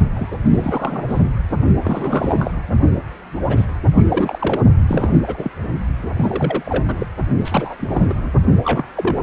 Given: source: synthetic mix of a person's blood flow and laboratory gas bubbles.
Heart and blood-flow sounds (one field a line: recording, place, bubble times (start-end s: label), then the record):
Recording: Doppler ultrasound of blood flow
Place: precordium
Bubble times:
0.15-0.36 s: bubbles
0.45-1.23 s: bubbles
1.81-2.51 s: bubbles
3.48-3.66 s: bubbles
3.95-4.59 s: bubbles
4.88-5.51 s: bubbles
6.17-6.63 s: bubbles
6.66-7.07 s: bubbles
7.45-7.75 s: bubbles
7.79-8.32 s: bubbles
8.64-8.85 s: bubbles
8.96-9.21 s: bubbles
From the record:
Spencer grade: 3 (all of the cardiac periods contain showers or single bubble signals, but not dominating or overriding the cardiac motion signals)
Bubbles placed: only in the low amplitude regions of the cardiac cycle